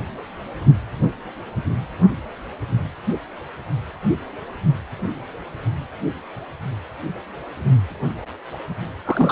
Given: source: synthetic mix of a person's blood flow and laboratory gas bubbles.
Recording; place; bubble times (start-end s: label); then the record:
Doppler ultrasound of blood flow; precordium
9.05-9.32 s: bubbles
From the record:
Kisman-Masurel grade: 222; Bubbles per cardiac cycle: several, 3 to 8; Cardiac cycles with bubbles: 10 to 50%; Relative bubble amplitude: moderate (0.250 to 0.450); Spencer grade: 2 (many but less than half of the cardiac periods contain bubble signals, singularly or in groups); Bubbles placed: only in the low amplitude regions of the cardiac cycle